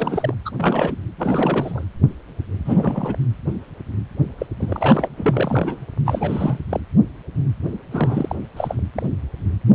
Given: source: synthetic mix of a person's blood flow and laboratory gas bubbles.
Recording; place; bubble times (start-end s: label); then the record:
Doppler ultrasound of blood flow; precordium
0.00-0.34 s: bubbles
0.45-0.51 s: bubbles
0.57-0.96 s: bubbles
1.18-1.84 s: bubbles
2.65-3.17 s: bubbles
4.38-4.46 s: bubbles
4.59-5.08 s: bubbles
5.17-5.77 s: bubbles
6.05-6.59 s: bubbles
6.70-6.80 s: bubbles
7.91-8.36 s: bubbles
8.56-8.75 s: bubbles
8.95-9.06 s: bubbles
From the record:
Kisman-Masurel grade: 332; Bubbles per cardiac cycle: rolling drumbeat, 9 or more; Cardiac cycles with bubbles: 50 to 99%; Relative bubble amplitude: moderate (0.250 to 0.450); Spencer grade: 3 (all of the cardiac periods contain showers or single bubble signals, but not dominating or overriding the cardiac motion signals); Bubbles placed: anywhere in the cardiac cycle